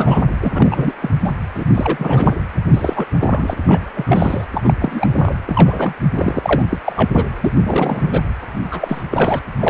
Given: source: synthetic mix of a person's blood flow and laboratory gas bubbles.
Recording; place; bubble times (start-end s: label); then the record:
Doppler ultrasound of blood flow; precordium
0.00-0.28 s: bubbles
0.42-0.51 s: bubbles
0.55-0.92 s: bubbles
1.02-1.10 s: bubbles
1.20-1.33 s: bubbles
1.54-1.65 s: bubbles
1.74-2.37 s: bubbles
2.69-3.06 s: bubbles
3.20-3.55 s: bubbles
3.63-3.91 s: bubbles
3.95-4.45 s: bubbles
4.52-4.74 s: bubbles
4.79-5.33 s: bubbles
5.45-5.94 s: bubbles
6.14-6.62 s: bubbles
6.69-6.79 s: bubbles
6.85-7.26 s: bubbles
7.40-7.52 s: bubbles
7.63-8.04 s: bubbles
8.07-8.21 s: bubbles
8.70-9.03 s: bubbles
9.11-9.42 s: bubbles
9.60-9.70 s: bubbles
From the record:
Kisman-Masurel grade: 343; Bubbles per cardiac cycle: rolling drumbeat, 9 or more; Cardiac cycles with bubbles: 100%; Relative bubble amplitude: loud (0.450 to 0.775); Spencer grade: 3 (all of the cardiac periods contain showers or single bubble signals, but not dominating or overriding the cardiac motion signals); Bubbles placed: anywhere in the cardiac cycle